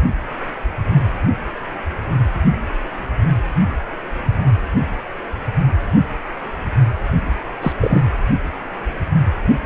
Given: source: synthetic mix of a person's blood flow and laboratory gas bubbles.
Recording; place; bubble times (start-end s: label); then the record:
Doppler ultrasound of blood flow; precordium
7.61-7.73 s: bubbles
7.80-8.02 s: bubbles
From the record:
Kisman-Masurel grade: 112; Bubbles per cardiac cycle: 1 to 2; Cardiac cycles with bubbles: 1 to 10%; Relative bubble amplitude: moderate (0.250 to 0.450); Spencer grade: 1 (occasional bubble signal discernible with the cardiac motion signal, with majority of cardiac periods free of bubbles); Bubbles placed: anywhere in the cardiac cycle